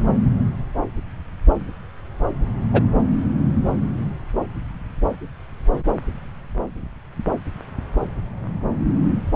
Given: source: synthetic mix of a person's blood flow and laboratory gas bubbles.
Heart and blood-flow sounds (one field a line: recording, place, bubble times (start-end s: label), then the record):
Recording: Doppler ultrasound of blood flow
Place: subclavian vein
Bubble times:
2.73-2.81 s: bubbles
From the record:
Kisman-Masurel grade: 113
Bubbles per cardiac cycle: 1 to 2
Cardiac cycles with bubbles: 1 to 10%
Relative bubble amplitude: loud (0.450 to 0.775)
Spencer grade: 1 (occasional bubble signal discernible with the cardiac motion signal, with majority of cardiac periods free of bubbles)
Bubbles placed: anywhere in the cardiac cycle